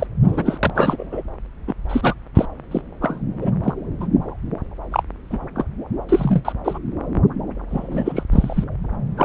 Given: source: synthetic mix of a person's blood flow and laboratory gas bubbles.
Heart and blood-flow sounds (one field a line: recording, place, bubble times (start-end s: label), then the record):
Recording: Doppler ultrasound of blood flow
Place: subclavian vein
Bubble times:
0.00-0.07 s: bubbles
0.22-0.58 s: bubbles
0.62-0.72 s: bubbles
0.75-1.22 s: bubbles
1.67-1.73 s: bubbles
1.89-2.14 s: bubbles
2.35-2.46 s: bubbles
2.71-2.81 s: bubbles
3.01-3.21 s: bubbles
3.37-3.50 s: bubbles
3.63-3.73 s: bubbles
4.00-4.07 s: bubbles
4.91-5.03 s: bubbles
5.30-5.38 s: bubbles
5.55-5.64 s: bubbles
6.09-6.53 s: bubbles
6.64-6.79 s: bubbles
7.71-8.23 s: bubbles
8.31-8.64 s: bubbles
9.17-9.25 s: bubbles
From the record:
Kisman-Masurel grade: 242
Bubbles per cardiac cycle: several, 3 to 8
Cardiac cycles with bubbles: 100%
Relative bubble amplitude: moderate (0.250 to 0.450)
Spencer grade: 3 (all of the cardiac periods contain showers or single bubble signals, but not dominating or overriding the cardiac motion signals)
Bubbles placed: anywhere in the cardiac cycle